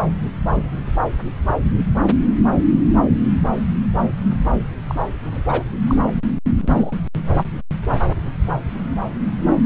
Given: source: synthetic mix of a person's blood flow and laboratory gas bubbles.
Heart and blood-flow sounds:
Doppler ultrasound of blood flow; subclavian vein
4.88-4.95 s: bubbles
5.26-5.43 s: bubbles
5.48-5.63 s: bubbles
5.87-5.97 s: bubbles
6.02-6.14 s: bubbles
6.61-6.92 s: bubbles
From the record:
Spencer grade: 2 (many but less than half of the cardiac periods contain bubble signals, singularly or in groups); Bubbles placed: anywhere in the cardiac cycle

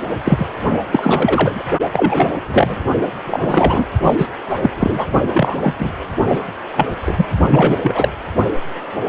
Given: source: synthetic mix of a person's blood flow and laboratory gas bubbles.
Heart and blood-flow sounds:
Doppler ultrasound of blood flow; precordium
0.24-0.47 s: bubbles
0.92-1.63 s: bubbles
1.93-2.34 s: bubbles
2.48-2.75 s: bubbles
3.26-3.85 s: bubbles
4.04-4.27 s: bubbles
4.49-4.58 s: bubbles
4.62-4.70 s: bubbles
4.79-5.06 s: bubbles
5.34-5.73 s: bubbles
5.79-5.91 s: bubbles
6.27-6.39 s: bubbles
6.76-6.87 s: bubbles
7.05-7.28 s: bubbles
7.50-7.77 s: bubbles
7.82-8.09 s: bubbles
From the record:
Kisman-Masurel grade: 243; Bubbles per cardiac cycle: several, 3 to 8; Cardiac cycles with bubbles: 100%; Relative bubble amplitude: loud (0.450 to 0.775); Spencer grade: 3 (all of the cardiac periods contain showers or single bubble signals, but not dominating or overriding the cardiac motion signals); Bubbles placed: only in the low amplitude regions of the cardiac cycle

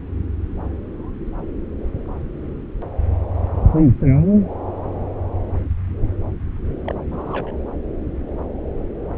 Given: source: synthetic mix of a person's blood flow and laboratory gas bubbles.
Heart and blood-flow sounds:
Doppler ultrasound of blood flow; subclavian vein
6.84-6.94 s: bubbles
7.11-7.55 s: bubbles
From the record:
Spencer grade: 1 (occasional bubble signal discernible with the cardiac motion signal, with majority of cardiac periods free of bubbles); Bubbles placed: anywhere in the cardiac cycle

